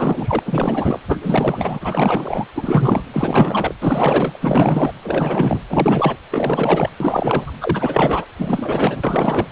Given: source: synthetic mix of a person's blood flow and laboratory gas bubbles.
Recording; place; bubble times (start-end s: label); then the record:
Doppler ultrasound of blood flow; precordium
0.00-0.39 s: bubbles
0.46-0.99 s: bubbles
1.08-1.18 s: bubbles
1.21-2.46 s: bubbles
2.54-3.04 s: bubbles
3.12-3.74 s: bubbles
3.81-4.93 s: bubbles
5.03-5.61 s: bubbles
5.69-6.17 s: bubbles
6.31-6.90 s: bubbles
7.00-7.53 s: bubbles
7.61-8.26 s: bubbles
8.38-9.47 s: bubbles
From the record:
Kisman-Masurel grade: 444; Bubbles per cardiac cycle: continuous sound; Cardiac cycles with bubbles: 100%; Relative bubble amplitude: maximal (0.775 to 0.999); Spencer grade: 4 (maximum detectable bubble signal sounding continuously throughout systole and diastole of every cardiac period, and overriding the amplitude of the normal cardiac signals); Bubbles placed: anywhere in the cardiac cycle